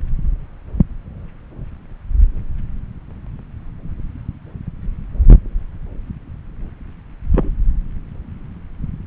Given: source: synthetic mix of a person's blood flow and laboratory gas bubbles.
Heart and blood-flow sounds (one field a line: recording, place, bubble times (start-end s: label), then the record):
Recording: Doppler ultrasound of blood flow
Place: subclavian vein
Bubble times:
7.31-7.50 s: bubbles
From the record:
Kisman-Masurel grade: 112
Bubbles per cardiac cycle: 1 to 2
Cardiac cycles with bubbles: 1 to 10%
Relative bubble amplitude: moderate (0.250 to 0.450)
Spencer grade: 1 (occasional bubble signal discernible with the cardiac motion signal, with majority of cardiac periods free of bubbles)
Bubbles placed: anywhere in the cardiac cycle